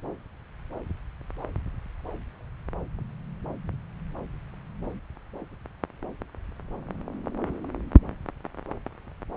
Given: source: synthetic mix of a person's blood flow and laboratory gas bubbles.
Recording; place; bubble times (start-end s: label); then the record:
Doppler ultrasound of blood flow; subclavian vein
no bubbles
From the record:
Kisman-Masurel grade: 000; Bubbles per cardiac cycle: 0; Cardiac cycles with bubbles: 0%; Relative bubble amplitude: no bubbles discernible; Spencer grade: 0 (complete lack of bubble signals)